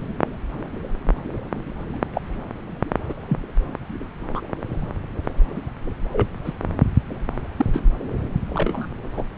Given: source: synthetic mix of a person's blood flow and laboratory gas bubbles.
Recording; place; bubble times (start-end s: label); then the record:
Doppler ultrasound of blood flow; subclavian vein
2.15-2.21 s: bubbles
3.08-3.13 s: bubbles
3.28-3.38 s: bubbles
4.35-4.42 s: bubbles
6.12-6.28 s: bubbles
6.44-6.54 s: bubbles
7.57-7.66 s: bubbles
7.73-7.81 s: bubbles
8.54-8.87 s: bubbles
9.17-9.22 s: bubbles
From the record:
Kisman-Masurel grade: 122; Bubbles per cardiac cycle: 1 to 2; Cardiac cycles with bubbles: 10 to 50%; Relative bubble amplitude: moderate (0.250 to 0.450); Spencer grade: 2 (many but less than half of the cardiac periods contain bubble signals, singularly or in groups); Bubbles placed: anywhere in the cardiac cycle